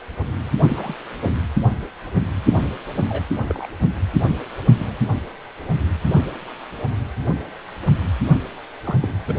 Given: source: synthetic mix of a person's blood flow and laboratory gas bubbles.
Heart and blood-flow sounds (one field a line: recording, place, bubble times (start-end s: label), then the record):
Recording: Doppler ultrasound of blood flow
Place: precordium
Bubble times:
0.67-0.94 s: bubbles
1.26-1.30 s: bubbles
3.08-3.25 s: bubbles
3.47-3.67 s: bubbles
4.79-4.97 s: bubbles
8.84-8.96 s: bubbles
9.01-9.09 s: bubbles
9.28-9.35 s: bubbles
From the record:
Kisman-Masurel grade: 121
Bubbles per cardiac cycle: 1 to 2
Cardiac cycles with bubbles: 10 to 50%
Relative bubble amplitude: barely perceptible (0.100 to 0.250)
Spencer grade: 2 (many but less than half of the cardiac periods contain bubble signals, singularly or in groups)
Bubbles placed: anywhere in the cardiac cycle